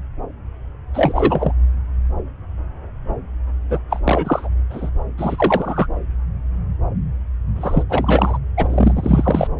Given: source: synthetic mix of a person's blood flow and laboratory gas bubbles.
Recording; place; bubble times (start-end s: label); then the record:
Doppler ultrasound of blood flow; subclavian vein
0.93-1.52 s: bubbles
3.69-3.79 s: bubbles
3.90-4.01 s: bubbles
4.04-4.49 s: bubbles
4.70-4.92 s: bubbles
5.18-5.88 s: bubbles
7.55-7.84 s: bubbles
7.89-8.38 s: bubbles
8.57-8.93 s: bubbles
8.95-9.47 s: bubbles
From the record:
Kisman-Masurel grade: 233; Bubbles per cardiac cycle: several, 3 to 8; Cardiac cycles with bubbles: 50 to 99%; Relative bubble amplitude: loud (0.450 to 0.775); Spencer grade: 3 (all of the cardiac periods contain showers or single bubble signals, but not dominating or overriding the cardiac motion signals); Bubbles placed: anywhere in the cardiac cycle